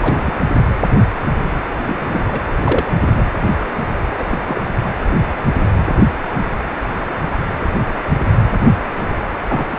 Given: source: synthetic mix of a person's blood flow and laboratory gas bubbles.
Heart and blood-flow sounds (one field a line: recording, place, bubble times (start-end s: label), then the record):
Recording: Doppler ultrasound of blood flow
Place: precordium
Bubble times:
0.00-0.32 s: bubbles
1.85-1.96 s: bubbles
1.99-2.42 s: bubbles
2.64-2.91 s: bubbles
3.01-3.09 s: bubbles
3.16-3.22 s: bubbles
4.18-4.24 s: bubbles
4.31-4.38 s: bubbles
4.48-4.62 s: bubbles
9.48-9.65 s: bubbles
9.71-9.79 s: bubbles
From the record:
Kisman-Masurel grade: 232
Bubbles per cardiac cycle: several, 3 to 8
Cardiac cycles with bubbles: 50 to 99%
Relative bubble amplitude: moderate (0.250 to 0.450)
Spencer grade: 3 (all of the cardiac periods contain showers or single bubble signals, but not dominating or overriding the cardiac motion signals)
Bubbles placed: anywhere in the cardiac cycle